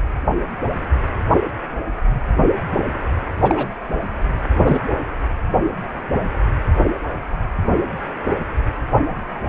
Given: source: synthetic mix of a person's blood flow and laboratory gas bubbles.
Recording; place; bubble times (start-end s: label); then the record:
Doppler ultrasound of blood flow; precordium
3.42-3.67 s: bubbles
4.65-4.81 s: bubbles
From the record:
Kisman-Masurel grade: 122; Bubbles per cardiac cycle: 1 to 2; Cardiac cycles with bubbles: 10 to 50%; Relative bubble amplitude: moderate (0.250 to 0.450); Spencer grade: 2 (many but less than half of the cardiac periods contain bubble signals, singularly or in groups); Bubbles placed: anywhere in the cardiac cycle